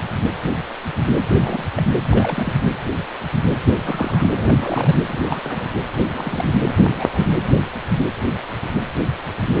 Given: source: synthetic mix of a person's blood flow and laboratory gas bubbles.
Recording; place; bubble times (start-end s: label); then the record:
Doppler ultrasound of blood flow; precordium
1.35-1.64 s: bubbles
1.76-1.83 s: bubbles
2.10-2.53 s: bubbles
3.85-4.29 s: bubbles
4.39-4.99 s: bubbles
5.08-5.71 s: bubbles
6.03-6.54 s: bubbles
6.75-7.29 s: bubbles
From the record:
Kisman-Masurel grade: 222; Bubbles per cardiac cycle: several, 3 to 8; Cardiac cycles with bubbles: 10 to 50%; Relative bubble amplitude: moderate (0.250 to 0.450); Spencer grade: 2 (many but less than half of the cardiac periods contain bubble signals, singularly or in groups); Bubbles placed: anywhere in the cardiac cycle